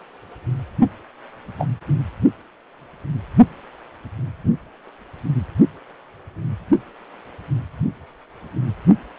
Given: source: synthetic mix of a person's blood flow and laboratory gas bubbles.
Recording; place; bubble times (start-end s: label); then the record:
Doppler ultrasound of blood flow; precordium
1.58-1.67 s: bubbles
From the record:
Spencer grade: 1 (occasional bubble signal discernible with the cardiac motion signal, with majority of cardiac periods free of bubbles); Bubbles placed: only in the low amplitude regions of the cardiac cycle